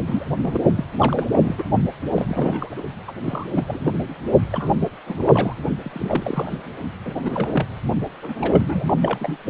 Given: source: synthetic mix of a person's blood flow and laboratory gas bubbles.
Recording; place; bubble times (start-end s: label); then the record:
Doppler ultrasound of blood flow; precordium
0.05-0.25 s: bubbles
0.43-0.59 s: bubbles
0.76-0.85 s: bubbles
0.96-1.55 s: bubbles
1.58-1.64 s: bubbles
2.15-2.81 s: bubbles
3.07-3.12 s: bubbles
3.23-4.23 s: bubbles
4.52-4.71 s: bubbles
5.06-5.54 s: bubbles
5.83-6.71 s: bubbles
7.05-7.67 s: bubbles
8.22-8.94 s: bubbles
9.02-9.37 s: bubbles
From the record:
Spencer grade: 3 (all of the cardiac periods contain showers or single bubble signals, but not dominating or overriding the cardiac motion signals); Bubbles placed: only in the low amplitude regions of the cardiac cycle